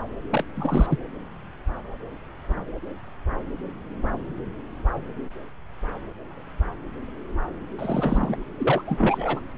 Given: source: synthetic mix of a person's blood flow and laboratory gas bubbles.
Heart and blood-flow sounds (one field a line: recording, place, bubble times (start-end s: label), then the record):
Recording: Doppler ultrasound of blood flow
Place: subclavian vein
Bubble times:
0.32-0.44 s: bubbles
0.55-0.98 s: bubbles
7.79-8.37 s: bubbles
8.58-8.82 s: bubbles
8.87-9.40 s: bubbles
From the record:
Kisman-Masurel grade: 222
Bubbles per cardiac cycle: several, 3 to 8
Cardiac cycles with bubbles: 10 to 50%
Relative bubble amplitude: moderate (0.250 to 0.450)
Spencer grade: 2 (many but less than half of the cardiac periods contain bubble signals, singularly or in groups)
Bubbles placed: anywhere in the cardiac cycle